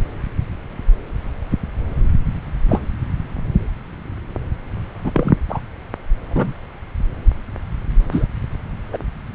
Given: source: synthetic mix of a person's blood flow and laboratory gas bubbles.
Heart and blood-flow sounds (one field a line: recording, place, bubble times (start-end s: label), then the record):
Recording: Doppler ultrasound of blood flow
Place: subclavian vein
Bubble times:
2.69-2.82 s: bubbles
5.04-5.35 s: bubbles
5.49-5.60 s: bubbles
6.30-6.52 s: bubbles
8.11-8.27 s: bubbles
8.93-8.98 s: bubbles
From the record:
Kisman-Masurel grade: 123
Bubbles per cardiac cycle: 1 to 2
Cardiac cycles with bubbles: 10 to 50%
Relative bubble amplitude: loud (0.450 to 0.775)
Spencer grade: 2 (many but less than half of the cardiac periods contain bubble signals, singularly or in groups)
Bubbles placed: anywhere in the cardiac cycle